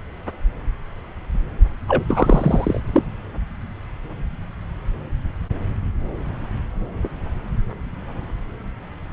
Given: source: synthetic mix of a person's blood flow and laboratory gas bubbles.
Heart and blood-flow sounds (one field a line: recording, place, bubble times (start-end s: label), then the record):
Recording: Doppler ultrasound of blood flow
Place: subclavian vein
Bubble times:
1.88-2.04 s: bubbles
2.08-2.80 s: bubbles
2.93-3.03 s: bubbles
From the record:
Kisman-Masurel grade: 213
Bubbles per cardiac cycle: several, 3 to 8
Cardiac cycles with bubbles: 1 to 10%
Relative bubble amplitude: loud (0.450 to 0.775)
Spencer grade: 1 (occasional bubble signal discernible with the cardiac motion signal, with majority of cardiac periods free of bubbles)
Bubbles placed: anywhere in the cardiac cycle